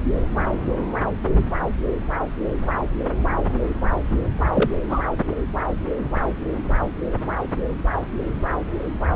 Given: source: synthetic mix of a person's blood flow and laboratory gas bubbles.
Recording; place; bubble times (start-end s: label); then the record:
Doppler ultrasound of blood flow; subclavian vein
4.51-4.79 s: bubbles
4.89-4.99 s: bubbles
From the record:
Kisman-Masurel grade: 222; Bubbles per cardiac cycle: several, 3 to 8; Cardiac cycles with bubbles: 10 to 50%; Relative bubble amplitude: moderate (0.250 to 0.450); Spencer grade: 2 (many but less than half of the cardiac periods contain bubble signals, singularly or in groups); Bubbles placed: anywhere in the cardiac cycle